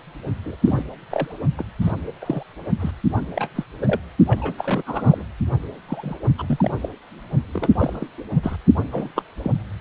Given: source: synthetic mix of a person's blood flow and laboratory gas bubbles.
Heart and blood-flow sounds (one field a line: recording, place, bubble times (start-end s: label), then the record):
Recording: Doppler ultrasound of blood flow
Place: precordium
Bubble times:
0.45-0.56 s: bubbles
0.64-0.83 s: bubbles
1.10-1.34 s: bubbles
1.57-1.64 s: bubbles
1.81-1.91 s: bubbles
2.21-2.43 s: bubbles
2.79-2.91 s: bubbles
3.35-3.49 s: bubbles
3.55-3.64 s: bubbles
3.79-4.00 s: bubbles
4.26-4.54 s: bubbles
4.57-4.82 s: bubbles
4.86-5.24 s: bubbles
5.87-6.17 s: bubbles
6.38-6.71 s: bubbles
6.81-6.89 s: bubbles
7.53-7.69 s: bubbles
7.72-8.07 s: bubbles
8.30-8.57 s: bubbles
8.92-9.11 s: bubbles
9.16-9.23 s: bubbles
9.42-9.52 s: bubbles
From the record:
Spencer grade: 3 (all of the cardiac periods contain showers or single bubble signals, but not dominating or overriding the cardiac motion signals)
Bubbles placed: only in the low amplitude regions of the cardiac cycle